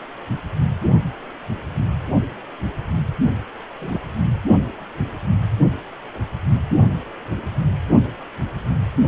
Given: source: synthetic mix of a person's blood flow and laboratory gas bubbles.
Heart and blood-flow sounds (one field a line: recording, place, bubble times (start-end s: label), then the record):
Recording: Doppler ultrasound of blood flow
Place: precordium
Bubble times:
3.78-4.00 s: bubbles
From the record:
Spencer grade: 1 (occasional bubble signal discernible with the cardiac motion signal, with majority of cardiac periods free of bubbles)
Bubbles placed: only in the low amplitude regions of the cardiac cycle